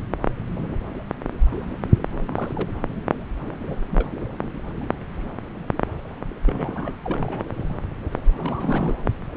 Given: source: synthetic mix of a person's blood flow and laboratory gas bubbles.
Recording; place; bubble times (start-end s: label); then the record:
Doppler ultrasound of blood flow; subclavian vein
2.28-2.69 s: bubbles
3.66-3.76 s: bubbles
3.91-4.06 s: bubbles
6.46-6.92 s: bubbles
7.04-7.46 s: bubbles
8.38-8.96 s: bubbles
From the record:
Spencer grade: 2 (many but less than half of the cardiac periods contain bubble signals, singularly or in groups); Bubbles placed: anywhere in the cardiac cycle